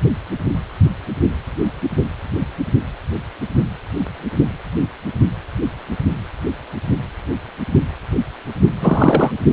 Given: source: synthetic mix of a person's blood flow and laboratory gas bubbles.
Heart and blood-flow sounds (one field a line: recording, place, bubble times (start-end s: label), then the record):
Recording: Doppler ultrasound of blood flow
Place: precordium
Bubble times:
8.80-9.31 s: bubbles
From the record:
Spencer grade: 1 (occasional bubble signal discernible with the cardiac motion signal, with majority of cardiac periods free of bubbles)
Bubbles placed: only in the low amplitude regions of the cardiac cycle